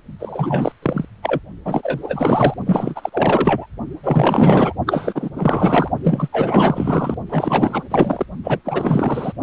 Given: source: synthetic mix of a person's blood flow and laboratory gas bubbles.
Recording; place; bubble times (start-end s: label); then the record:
Doppler ultrasound of blood flow; precordium
0.19-0.72 s: bubbles
0.82-1.05 s: bubbles
1.23-1.40 s: bubbles
1.65-2.54 s: bubbles
2.66-3.09 s: bubbles
3.12-3.67 s: bubbles
4.03-4.74 s: bubbles
4.87-5.29 s: bubbles
5.35-5.89 s: bubbles
6.03-6.29 s: bubbles
6.32-7.16 s: bubbles
7.29-7.83 s: bubbles
7.91-8.25 s: bubbles
8.43-8.60 s: bubbles
8.64-9.32 s: bubbles
From the record:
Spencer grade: 4 (maximum detectable bubble signal sounding continuously throughout systole and diastole of every cardiac period, and overriding the amplitude of the normal cardiac signals); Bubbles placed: only in the low amplitude regions of the cardiac cycle